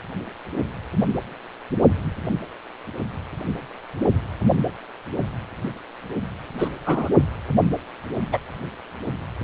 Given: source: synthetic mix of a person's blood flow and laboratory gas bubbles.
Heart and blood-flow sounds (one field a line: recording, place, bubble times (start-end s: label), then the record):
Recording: Doppler ultrasound of blood flow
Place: precordium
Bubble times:
6.58-6.69 s: bubbles
6.84-7.09 s: bubbles
8.32-8.38 s: bubbles
From the record:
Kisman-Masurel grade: 123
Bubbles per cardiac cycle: 1 to 2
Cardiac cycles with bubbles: 10 to 50%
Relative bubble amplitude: loud (0.450 to 0.775)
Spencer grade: 2 (many but less than half of the cardiac periods contain bubble signals, singularly or in groups)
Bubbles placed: only in the low amplitude regions of the cardiac cycle